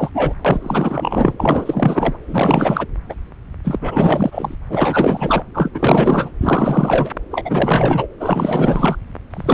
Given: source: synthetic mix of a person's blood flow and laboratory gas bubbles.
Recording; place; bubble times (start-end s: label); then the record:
Doppler ultrasound of blood flow; subclavian vein
0.00-0.10 s: bubbles
0.13-0.33 s: bubbles
0.45-2.17 s: bubbles
2.27-2.87 s: bubbles
3.09-3.16 s: bubbles
3.64-4.54 s: bubbles
4.70-5.43 s: bubbles
5.54-5.70 s: bubbles
5.74-6.30 s: bubbles
6.41-7.09 s: bubbles
7.30-8.07 s: bubbles
8.19-8.97 s: bubbles
9.30-9.54 s: bubbles
From the record:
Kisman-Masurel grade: 444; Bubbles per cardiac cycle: continuous sound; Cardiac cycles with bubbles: 100%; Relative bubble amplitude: maximal (0.775 to 0.999); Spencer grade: 4 (maximum detectable bubble signal sounding continuously throughout systole and diastole of every cardiac period, and overriding the amplitude of the normal cardiac signals); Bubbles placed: anywhere in the cardiac cycle